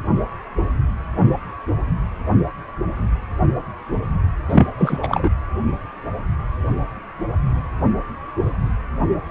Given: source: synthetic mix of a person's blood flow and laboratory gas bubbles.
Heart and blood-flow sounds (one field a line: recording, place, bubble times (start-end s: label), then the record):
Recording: Doppler ultrasound of blood flow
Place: precordium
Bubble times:
4.49-4.67 s: bubbles
4.78-4.98 s: bubbles
5.03-5.29 s: bubbles
From the record:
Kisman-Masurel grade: 213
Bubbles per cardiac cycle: several, 3 to 8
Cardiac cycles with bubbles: 1 to 10%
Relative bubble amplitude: loud (0.450 to 0.775)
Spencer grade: 1 (occasional bubble signal discernible with the cardiac motion signal, with majority of cardiac periods free of bubbles)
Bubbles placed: anywhere in the cardiac cycle